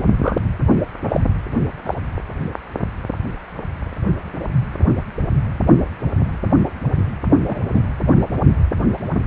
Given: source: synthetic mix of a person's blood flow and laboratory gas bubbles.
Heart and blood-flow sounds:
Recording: Doppler ultrasound of blood flow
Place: precordium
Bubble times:
0.22-0.38 s: bubbles
1.08-1.21 s: bubbles
1.84-1.95 s: bubbles
7.46-7.63 s: bubbles
7.73-7.81 s: bubbles
From the record:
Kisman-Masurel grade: 122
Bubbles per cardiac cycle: 1 to 2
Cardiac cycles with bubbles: 10 to 50%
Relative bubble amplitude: moderate (0.250 to 0.450)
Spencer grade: 2 (many but less than half of the cardiac periods contain bubble signals, singularly or in groups)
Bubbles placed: only in the low amplitude regions of the cardiac cycle

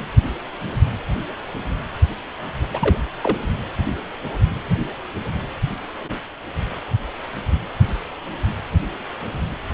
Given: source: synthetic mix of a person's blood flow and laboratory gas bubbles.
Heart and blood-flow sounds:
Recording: Doppler ultrasound of blood flow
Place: precordium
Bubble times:
2.73-2.98 s: bubbles
3.21-3.38 s: bubbles
From the record:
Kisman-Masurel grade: 212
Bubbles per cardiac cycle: several, 3 to 8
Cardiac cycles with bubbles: 1 to 10%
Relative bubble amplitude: moderate (0.250 to 0.450)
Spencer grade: 1 (occasional bubble signal discernible with the cardiac motion signal, with majority of cardiac periods free of bubbles)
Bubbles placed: anywhere in the cardiac cycle

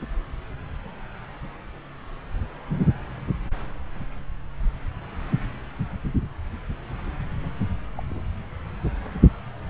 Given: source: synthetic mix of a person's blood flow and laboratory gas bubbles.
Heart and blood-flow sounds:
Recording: Doppler ultrasound of blood flow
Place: subclavian vein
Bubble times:
0.01-0.06 s: bubbles
7.96-8.04 s: bubbles
8.09-8.21 s: bubbles
9.66-9.70 s: bubbles
From the record:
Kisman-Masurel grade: 121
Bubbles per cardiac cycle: 1 to 2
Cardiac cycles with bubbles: 10 to 50%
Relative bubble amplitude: barely perceptible (0.100 to 0.250)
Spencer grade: 2 (many but less than half of the cardiac periods contain bubble signals, singularly or in groups)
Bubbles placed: anywhere in the cardiac cycle

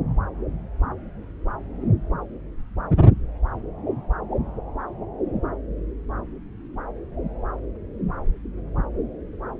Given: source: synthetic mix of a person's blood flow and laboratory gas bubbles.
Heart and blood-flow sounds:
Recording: Doppler ultrasound of blood flow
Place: subclavian vein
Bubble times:
no bubbles
From the record:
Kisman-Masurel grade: 000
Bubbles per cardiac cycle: 0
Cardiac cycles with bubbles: 0%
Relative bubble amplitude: no bubbles discernible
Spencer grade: 0 (complete lack of bubble signals)

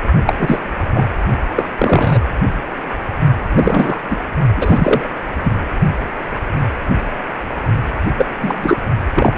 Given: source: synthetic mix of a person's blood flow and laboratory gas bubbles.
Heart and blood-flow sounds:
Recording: Doppler ultrasound of blood flow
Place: precordium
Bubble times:
0.25-0.34 s: bubbles
0.38-0.59 s: bubbles
0.94-1.06 s: bubbles
1.56-1.68 s: bubbles
1.78-2.20 s: bubbles
3.55-4.00 s: bubbles
4.09-4.17 s: bubbles
4.56-5.10 s: bubbles
5.43-5.52 s: bubbles
8.17-8.26 s: bubbles
8.42-8.77 s: bubbles
9.15-9.34 s: bubbles
From the record:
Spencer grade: 3 (all of the cardiac periods contain showers or single bubble signals, but not dominating or overriding the cardiac motion signals)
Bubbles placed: only in the low amplitude regions of the cardiac cycle

